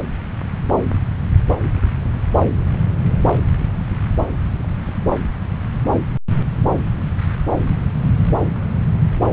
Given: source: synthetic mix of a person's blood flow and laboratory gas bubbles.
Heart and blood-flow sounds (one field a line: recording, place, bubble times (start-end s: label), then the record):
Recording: Doppler ultrasound of blood flow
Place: subclavian vein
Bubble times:
no bubbles
From the record:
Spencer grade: 0 (complete lack of bubble signals)